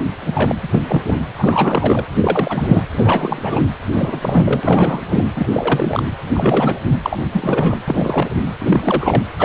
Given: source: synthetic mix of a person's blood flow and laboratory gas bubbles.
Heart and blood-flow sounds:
Doppler ultrasound of blood flow; precordium
0.22-0.55 s: bubbles
0.62-0.68 s: bubbles
0.71-0.83 s: bubbles
0.87-1.02 s: bubbles
1.05-1.16 s: bubbles
1.38-2.04 s: bubbles
2.21-2.87 s: bubbles
2.94-3.64 s: bubbles
3.92-5.03 s: bubbles
5.09-5.24 s: bubbles
5.35-5.47 s: bubbles
5.53-6.03 s: bubbles
6.34-6.79 s: bubbles
7.02-7.17 s: bubbles
7.33-7.78 s: bubbles
7.88-8.29 s: bubbles
8.58-9.23 s: bubbles
9.39-9.45 s: bubbles
From the record:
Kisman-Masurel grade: 343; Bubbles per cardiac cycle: rolling drumbeat, 9 or more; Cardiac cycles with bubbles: 100%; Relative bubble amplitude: loud (0.450 to 0.775); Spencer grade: 3 (all of the cardiac periods contain showers or single bubble signals, but not dominating or overriding the cardiac motion signals); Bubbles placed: anywhere in the cardiac cycle

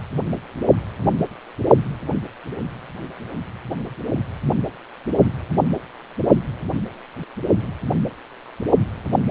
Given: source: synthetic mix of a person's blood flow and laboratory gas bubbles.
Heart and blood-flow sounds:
Doppler ultrasound of blood flow; precordium
7.58-7.73 s: bubbles
From the record:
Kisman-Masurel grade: 111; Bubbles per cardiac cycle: 1 to 2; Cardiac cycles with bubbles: 1 to 10%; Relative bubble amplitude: barely perceptible (0.100 to 0.250); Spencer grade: 1 (occasional bubble signal discernible with the cardiac motion signal, with majority of cardiac periods free of bubbles); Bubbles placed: only in the low amplitude regions of the cardiac cycle

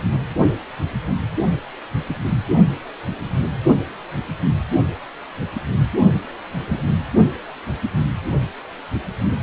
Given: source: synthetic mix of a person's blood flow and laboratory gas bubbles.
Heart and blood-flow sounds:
Doppler ultrasound of blood flow; precordium
6.67-6.83 s: bubbles
From the record:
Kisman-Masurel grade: 112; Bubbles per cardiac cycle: 1 to 2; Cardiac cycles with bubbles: 1 to 10%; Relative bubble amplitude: moderate (0.250 to 0.450); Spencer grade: 1 (occasional bubble signal discernible with the cardiac motion signal, with majority of cardiac periods free of bubbles); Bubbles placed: only in the low amplitude regions of the cardiac cycle

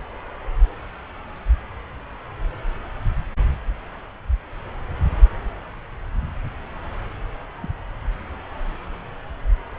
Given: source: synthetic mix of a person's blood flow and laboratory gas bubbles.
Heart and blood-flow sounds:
Doppler ultrasound of blood flow; subclavian vein
7.61-7.68 s: bubbles
From the record:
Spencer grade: 2 (many but less than half of the cardiac periods contain bubble signals, singularly or in groups); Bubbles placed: anywhere in the cardiac cycle

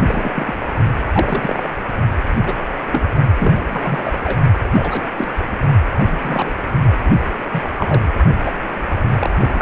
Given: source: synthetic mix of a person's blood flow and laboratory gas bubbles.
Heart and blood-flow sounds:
Doppler ultrasound of blood flow; precordium
0.07-0.54 s: bubbles
1.12-1.68 s: bubbles
2.42-2.54 s: bubbles
2.92-3.03 s: bubbles
3.38-4.40 s: bubbles
4.72-5.09 s: bubbles
5.17-5.39 s: bubbles
5.99-6.56 s: bubbles
7.04-7.10 s: bubbles
7.52-7.63 s: bubbles
7.78-8.13 s: bubbles
8.46-8.51 s: bubbles
9.19-9.62 s: bubbles
From the record:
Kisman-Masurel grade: 242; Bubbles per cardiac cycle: several, 3 to 8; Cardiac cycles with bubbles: 100%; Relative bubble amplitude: moderate (0.250 to 0.450); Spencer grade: 3 (all of the cardiac periods contain showers or single bubble signals, but not dominating or overriding the cardiac motion signals); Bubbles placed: only in the low amplitude regions of the cardiac cycle

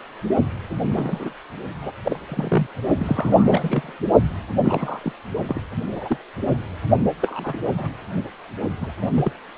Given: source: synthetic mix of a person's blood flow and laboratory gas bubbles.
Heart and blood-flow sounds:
Doppler ultrasound of blood flow; precordium
0.88-1.33 s: bubbles
1.82-1.92 s: bubbles
2.04-2.17 s: bubbles
2.29-2.67 s: bubbles
2.98-3.92 s: bubbles
4.63-5.00 s: bubbles
5.03-5.12 s: bubbles
5.47-5.62 s: bubbles
5.91-6.17 s: bubbles
7.21-7.57 s: bubbles
7.63-7.89 s: bubbles
8.63-8.68 s: bubbles
8.80-8.92 s: bubbles
9.01-9.11 s: bubbles
9.15-9.32 s: bubbles
From the record:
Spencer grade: 3 (all of the cardiac periods contain showers or single bubble signals, but not dominating or overriding the cardiac motion signals); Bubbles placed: only in the low amplitude regions of the cardiac cycle

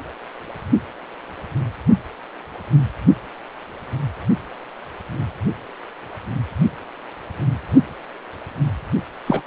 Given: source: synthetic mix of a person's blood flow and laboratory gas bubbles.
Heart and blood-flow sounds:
Doppler ultrasound of blood flow; precordium
9.26-9.42 s: bubbles
From the record:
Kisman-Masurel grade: 212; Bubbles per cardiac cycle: several, 3 to 8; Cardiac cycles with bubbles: 1 to 10%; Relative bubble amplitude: moderate (0.250 to 0.450); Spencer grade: 1 (occasional bubble signal discernible with the cardiac motion signal, with majority of cardiac periods free of bubbles); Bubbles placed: only in the low amplitude regions of the cardiac cycle

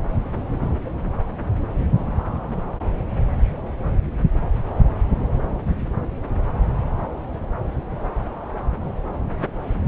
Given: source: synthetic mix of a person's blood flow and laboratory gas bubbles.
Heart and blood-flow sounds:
Doppler ultrasound of blood flow; subclavian vein
no bubbles
From the record:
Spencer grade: 0 (complete lack of bubble signals)

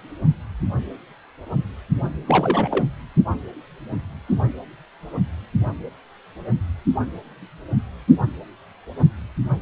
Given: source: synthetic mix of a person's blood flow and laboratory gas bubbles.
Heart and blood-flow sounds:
Doppler ultrasound of blood flow; precordium
2.27-2.85 s: bubbles
From the record:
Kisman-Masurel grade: 222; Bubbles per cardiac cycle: several, 3 to 8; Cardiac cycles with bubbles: 10 to 50%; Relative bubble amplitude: moderate (0.250 to 0.450); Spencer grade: 2 (many but less than half of the cardiac periods contain bubble signals, singularly or in groups); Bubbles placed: anywhere in the cardiac cycle

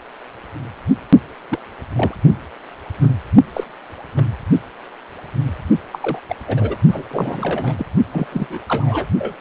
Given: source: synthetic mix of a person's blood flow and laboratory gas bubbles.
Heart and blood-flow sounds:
Doppler ultrasound of blood flow; precordium
1.49-1.59 s: bubbles
1.95-2.15 s: bubbles
3.01-3.13 s: bubbles
3.54-3.64 s: bubbles
4.16-4.25 s: bubbles
5.92-6.19 s: bubbles
6.28-6.35 s: bubbles
6.47-6.75 s: bubbles
6.91-7.04 s: bubbles
7.10-7.75 s: bubbles
7.78-7.85 s: bubbles
8.12-8.27 s: bubbles
8.32-8.61 s: bubbles
8.68-9.08 s: bubbles
9.18-9.35 s: bubbles
9.39-9.41 s: bubbles
From the record:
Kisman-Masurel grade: 232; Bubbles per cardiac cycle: several, 3 to 8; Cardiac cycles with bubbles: 50 to 99%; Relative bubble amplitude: moderate (0.250 to 0.450); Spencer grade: 3 (all of the cardiac periods contain showers or single bubble signals, but not dominating or overriding the cardiac motion signals); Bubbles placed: only in the low amplitude regions of the cardiac cycle

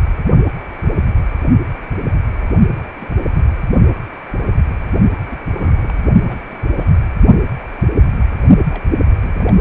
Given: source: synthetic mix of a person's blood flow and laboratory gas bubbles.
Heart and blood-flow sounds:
Doppler ultrasound of blood flow; precordium
2.74-2.79 s: bubbles
2.83-2.87 s: bubbles
3.00-3.06 s: bubbles
3.25-3.50 s: bubbles
5.29-5.37 s: bubbles
5.54-6.03 s: bubbles
6.27-6.57 s: bubbles
6.78-6.92 s: bubbles
8.70-8.86 s: bubbles
9.20-9.58 s: bubbles
From the record:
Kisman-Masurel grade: 221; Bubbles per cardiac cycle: several, 3 to 8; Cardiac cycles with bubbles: 10 to 50%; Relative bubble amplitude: barely perceptible (0.100 to 0.250); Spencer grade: 2 (many but less than half of the cardiac periods contain bubble signals, singularly or in groups); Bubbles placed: only in the low amplitude regions of the cardiac cycle

